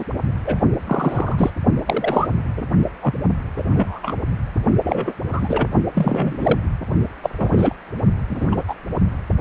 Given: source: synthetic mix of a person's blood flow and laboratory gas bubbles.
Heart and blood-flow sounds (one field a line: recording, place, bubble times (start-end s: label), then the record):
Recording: Doppler ultrasound of blood flow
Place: precordium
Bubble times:
0.00-0.04 s: bubbles
0.45-0.58 s: bubbles
0.86-1.50 s: bubbles
1.85-2.27 s: bubbles
2.56-2.63 s: bubbles
3.01-3.14 s: bubbles
3.57-3.63 s: bubbles
3.73-4.17 s: bubbles
4.83-5.15 s: bubbles
5.28-5.67 s: bubbles
5.95-6.58 s: bubbles
7.22-7.75 s: bubbles
8.29-8.47 s: bubbles
8.52-8.64 s: bubbles
8.68-8.75 s: bubbles
From the record:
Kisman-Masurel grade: 243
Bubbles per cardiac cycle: several, 3 to 8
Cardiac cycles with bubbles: 100%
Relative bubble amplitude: loud (0.450 to 0.775)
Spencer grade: 3 (all of the cardiac periods contain showers or single bubble signals, but not dominating or overriding the cardiac motion signals)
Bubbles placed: only in the low amplitude regions of the cardiac cycle